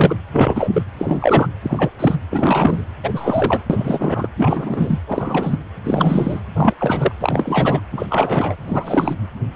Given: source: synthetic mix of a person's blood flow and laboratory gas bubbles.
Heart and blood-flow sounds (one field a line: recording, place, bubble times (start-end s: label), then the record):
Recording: Doppler ultrasound of blood flow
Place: precordium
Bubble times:
0.00-0.16 s: bubbles
0.32-0.70 s: bubbles
0.72-0.82 s: bubbles
0.98-1.47 s: bubbles
1.63-1.90 s: bubbles
1.99-2.15 s: bubbles
2.31-2.81 s: bubbles
3.03-3.61 s: bubbles
3.69-4.28 s: bubbles
4.37-4.99 s: bubbles
5.07-5.59 s: bubbles
5.84-6.40 s: bubbles
6.55-6.74 s: bubbles
6.79-7.12 s: bubbles
7.20-7.81 s: bubbles
7.92-8.07 s: bubbles
8.10-8.56 s: bubbles
8.61-9.16 s: bubbles
From the record:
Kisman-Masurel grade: 333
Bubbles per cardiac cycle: rolling drumbeat, 9 or more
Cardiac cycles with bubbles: 50 to 99%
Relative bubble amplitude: loud (0.450 to 0.775)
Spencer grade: 3 (all of the cardiac periods contain showers or single bubble signals, but not dominating or overriding the cardiac motion signals)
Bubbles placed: anywhere in the cardiac cycle